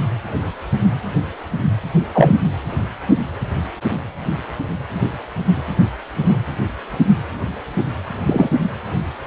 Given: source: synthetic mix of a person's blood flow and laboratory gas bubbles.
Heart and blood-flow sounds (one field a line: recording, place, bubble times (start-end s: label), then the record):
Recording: Doppler ultrasound of blood flow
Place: precordium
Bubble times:
2.12-2.37 s: bubbles
8.26-8.49 s: bubbles
From the record:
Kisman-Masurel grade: 123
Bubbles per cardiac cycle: 1 to 2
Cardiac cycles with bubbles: 10 to 50%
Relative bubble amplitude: loud (0.450 to 0.775)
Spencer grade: 2 (many but less than half of the cardiac periods contain bubble signals, singularly or in groups)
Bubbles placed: anywhere in the cardiac cycle